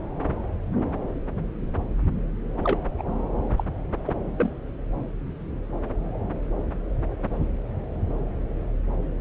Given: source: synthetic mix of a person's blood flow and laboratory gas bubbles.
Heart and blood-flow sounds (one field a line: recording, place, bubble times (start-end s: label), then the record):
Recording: Doppler ultrasound of blood flow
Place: subclavian vein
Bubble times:
2.64-2.79 s: bubbles
2.98-3.03 s: bubbles
3.57-3.64 s: bubbles
4.07-4.12 s: bubbles
4.38-4.51 s: bubbles
From the record:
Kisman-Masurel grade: 221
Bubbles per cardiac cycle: several, 3 to 8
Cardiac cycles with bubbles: 10 to 50%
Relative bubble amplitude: barely perceptible (0.100 to 0.250)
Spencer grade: 2 (many but less than half of the cardiac periods contain bubble signals, singularly or in groups)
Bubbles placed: anywhere in the cardiac cycle